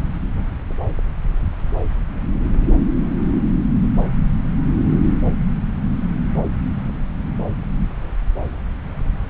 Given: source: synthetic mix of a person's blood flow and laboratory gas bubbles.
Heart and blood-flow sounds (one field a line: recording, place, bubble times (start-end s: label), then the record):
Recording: Doppler ultrasound of blood flow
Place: subclavian vein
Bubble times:
no bubbles
From the record:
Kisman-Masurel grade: 000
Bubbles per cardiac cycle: 0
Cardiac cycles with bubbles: 0%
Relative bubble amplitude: no bubbles discernible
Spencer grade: 0 (complete lack of bubble signals)